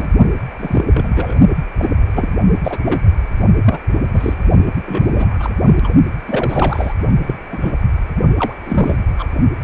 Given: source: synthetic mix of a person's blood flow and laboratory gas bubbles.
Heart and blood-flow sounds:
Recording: Doppler ultrasound of blood flow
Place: precordium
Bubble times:
0.00-0.08 s: bubbles
0.58-0.84 s: bubbles
0.93-1.35 s: bubbles
1.78-1.89 s: bubbles
2.06-2.28 s: bubbles
2.63-2.77 s: bubbles
2.84-3.02 s: bubbles
3.65-3.79 s: bubbles
4.14-4.34 s: bubbles
4.86-5.10 s: bubbles
5.13-5.51 s: bubbles
5.66-5.75 s: bubbles
5.83-5.92 s: bubbles
6.27-6.93 s: bubbles
7.27-7.34 s: bubbles
7.50-7.72 s: bubbles
8.39-8.53 s: bubbles
8.66-8.97 s: bubbles
9.19-9.26 s: bubbles
From the record:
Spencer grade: 3 (all of the cardiac periods contain showers or single bubble signals, but not dominating or overriding the cardiac motion signals)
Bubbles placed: only in the low amplitude regions of the cardiac cycle

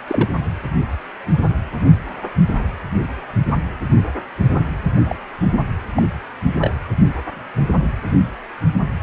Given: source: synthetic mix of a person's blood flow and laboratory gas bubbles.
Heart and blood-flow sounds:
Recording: Doppler ultrasound of blood flow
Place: precordium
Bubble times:
0.07-0.47 s: bubbles
5.04-5.16 s: bubbles
5.95-6.03 s: bubbles
6.60-6.70 s: bubbles
From the record:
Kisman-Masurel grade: 122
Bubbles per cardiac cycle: 1 to 2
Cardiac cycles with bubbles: 10 to 50%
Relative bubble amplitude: moderate (0.250 to 0.450)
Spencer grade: 2 (many but less than half of the cardiac periods contain bubble signals, singularly or in groups)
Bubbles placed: anywhere in the cardiac cycle

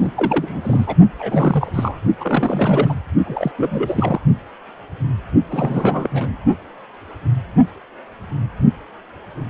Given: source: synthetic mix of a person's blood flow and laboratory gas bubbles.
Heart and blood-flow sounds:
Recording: Doppler ultrasound of blood flow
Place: precordium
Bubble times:
0.00-0.12 s: bubbles
0.16-0.97 s: bubbles
1.19-2.00 s: bubbles
2.20-2.95 s: bubbles
3.25-3.52 s: bubbles
3.57-4.21 s: bubbles
5.50-6.08 s: bubbles
6.12-6.37 s: bubbles
From the record:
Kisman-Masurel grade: 332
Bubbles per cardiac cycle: rolling drumbeat, 9 or more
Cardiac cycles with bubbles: 50 to 99%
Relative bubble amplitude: moderate (0.250 to 0.450)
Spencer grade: 3 (all of the cardiac periods contain showers or single bubble signals, but not dominating or overriding the cardiac motion signals)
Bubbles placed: only in the low amplitude regions of the cardiac cycle

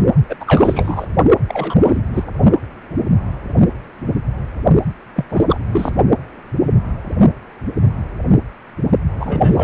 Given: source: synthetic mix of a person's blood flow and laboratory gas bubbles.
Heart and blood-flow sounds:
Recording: Doppler ultrasound of blood flow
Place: precordium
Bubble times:
0.29-0.36 s: bubbles
0.40-1.06 s: bubbles
1.48-1.77 s: bubbles
1.81-2.02 s: bubbles
2.14-2.23 s: bubbles
5.16-5.25 s: bubbles
5.29-5.45 s: bubbles
5.49-5.59 s: bubbles
5.71-5.91 s: bubbles
9.18-9.64 s: bubbles
From the record:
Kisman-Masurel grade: 223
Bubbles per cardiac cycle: several, 3 to 8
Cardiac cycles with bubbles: 10 to 50%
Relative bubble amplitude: loud (0.450 to 0.775)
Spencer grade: 2 (many but less than half of the cardiac periods contain bubble signals, singularly or in groups)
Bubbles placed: only in the low amplitude regions of the cardiac cycle

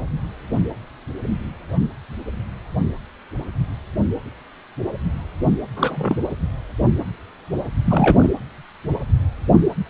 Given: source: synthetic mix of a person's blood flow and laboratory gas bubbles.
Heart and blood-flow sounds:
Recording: Doppler ultrasound of blood flow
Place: precordium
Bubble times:
5.76-6.22 s: bubbles
7.85-8.35 s: bubbles
From the record:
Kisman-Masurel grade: 222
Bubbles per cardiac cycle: several, 3 to 8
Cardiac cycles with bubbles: 10 to 50%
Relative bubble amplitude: moderate (0.250 to 0.450)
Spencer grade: 2 (many but less than half of the cardiac periods contain bubble signals, singularly or in groups)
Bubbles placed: anywhere in the cardiac cycle

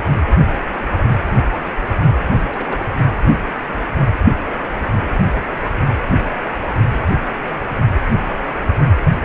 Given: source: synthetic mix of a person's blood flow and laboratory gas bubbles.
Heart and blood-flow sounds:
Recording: Doppler ultrasound of blood flow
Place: precordium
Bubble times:
2.29-2.85 s: bubbles
2.94-3.03 s: bubbles
From the record:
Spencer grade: 1 (occasional bubble signal discernible with the cardiac motion signal, with majority of cardiac periods free of bubbles)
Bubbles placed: anywhere in the cardiac cycle

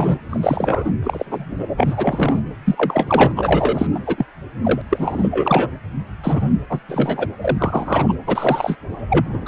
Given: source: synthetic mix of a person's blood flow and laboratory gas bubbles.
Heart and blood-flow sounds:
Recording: Doppler ultrasound of blood flow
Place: precordium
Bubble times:
0.00-0.18 s: bubbles
0.30-0.92 s: bubbles
1.02-1.67 s: bubbles
1.77-2.39 s: bubbles
2.65-2.75 s: bubbles
2.77-3.31 s: bubbles
3.36-3.87 s: bubbles
3.95-3.99 s: bubbles
4.06-4.26 s: bubbles
4.63-4.81 s: bubbles
4.90-5.29 s: bubbles
5.31-5.71 s: bubbles
6.23-6.51 s: bubbles
6.69-6.79 s: bubbles
6.88-7.27 s: bubbles
7.41-8.15 s: bubbles
8.26-8.76 s: bubbles
9.09-9.48 s: bubbles
From the record:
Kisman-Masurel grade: 243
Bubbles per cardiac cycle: several, 3 to 8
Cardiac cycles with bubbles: 100%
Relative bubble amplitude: loud (0.450 to 0.775)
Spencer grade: 3 (all of the cardiac periods contain showers or single bubble signals, but not dominating or overriding the cardiac motion signals)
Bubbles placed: anywhere in the cardiac cycle

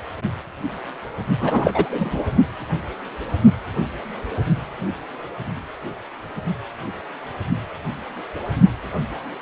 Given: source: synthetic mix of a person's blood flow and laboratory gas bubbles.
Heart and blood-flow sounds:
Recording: Doppler ultrasound of blood flow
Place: precordium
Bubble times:
1.41-2.23 s: bubbles
From the record:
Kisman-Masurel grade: 213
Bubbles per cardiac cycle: several, 3 to 8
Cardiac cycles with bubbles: 1 to 10%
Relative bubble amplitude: loud (0.450 to 0.775)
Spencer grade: 1 (occasional bubble signal discernible with the cardiac motion signal, with majority of cardiac periods free of bubbles)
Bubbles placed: only in the low amplitude regions of the cardiac cycle

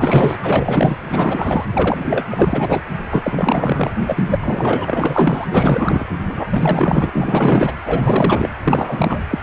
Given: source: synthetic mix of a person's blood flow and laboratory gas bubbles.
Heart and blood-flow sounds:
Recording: Doppler ultrasound of blood flow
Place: precordium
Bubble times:
0.00-0.38 s: bubbles
0.42-0.97 s: bubbles
1.06-1.65 s: bubbles
1.72-2.26 s: bubbles
2.30-2.83 s: bubbles
3.11-3.91 s: bubbles
4.07-5.46 s: bubbles
5.50-6.04 s: bubbles
6.29-6.48 s: bubbles
6.51-7.73 s: bubbles
7.85-8.49 s: bubbles
8.63-9.26 s: bubbles
9.30-9.38 s: bubbles
From the record:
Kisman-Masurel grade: 444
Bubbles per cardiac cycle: continuous sound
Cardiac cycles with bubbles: 100%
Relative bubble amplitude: maximal (0.775 to 0.999)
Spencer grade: 4 (maximum detectable bubble signal sounding continuously throughout systole and diastole of every cardiac period, and overriding the amplitude of the normal cardiac signals)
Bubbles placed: anywhere in the cardiac cycle

